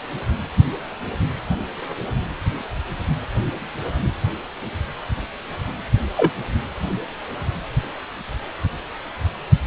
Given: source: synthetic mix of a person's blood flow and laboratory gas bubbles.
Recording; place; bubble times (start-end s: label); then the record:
Doppler ultrasound of blood flow; precordium
6.17-6.32 s: bubbles
From the record:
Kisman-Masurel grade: 113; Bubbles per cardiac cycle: 1 to 2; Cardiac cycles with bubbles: 1 to 10%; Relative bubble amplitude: loud (0.450 to 0.775); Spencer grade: 1 (occasional bubble signal discernible with the cardiac motion signal, with majority of cardiac periods free of bubbles); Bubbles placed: anywhere in the cardiac cycle